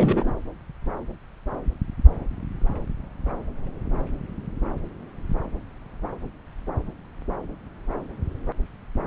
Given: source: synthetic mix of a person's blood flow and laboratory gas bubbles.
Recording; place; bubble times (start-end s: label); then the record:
Doppler ultrasound of blood flow; subclavian vein
0.00-0.31 s: bubbles
From the record:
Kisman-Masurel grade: 212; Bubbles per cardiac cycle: several, 3 to 8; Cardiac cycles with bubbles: 1 to 10%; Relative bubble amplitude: moderate (0.250 to 0.450); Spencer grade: 1 (occasional bubble signal discernible with the cardiac motion signal, with majority of cardiac periods free of bubbles); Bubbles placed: anywhere in the cardiac cycle